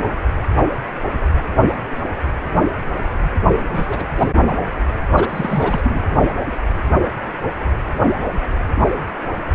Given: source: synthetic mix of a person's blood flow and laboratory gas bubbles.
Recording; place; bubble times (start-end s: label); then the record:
Doppler ultrasound of blood flow; precordium
3.71-4.04 s: bubbles
4.18-4.27 s: bubbles
4.47-4.54 s: bubbles
5.17-5.27 s: bubbles
5.29-5.81 s: bubbles
5.83-6.00 s: bubbles
From the record:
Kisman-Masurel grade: 222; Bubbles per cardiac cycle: several, 3 to 8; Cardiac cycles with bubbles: 10 to 50%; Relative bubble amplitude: moderate (0.250 to 0.450); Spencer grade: 2 (many but less than half of the cardiac periods contain bubble signals, singularly or in groups); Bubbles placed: anywhere in the cardiac cycle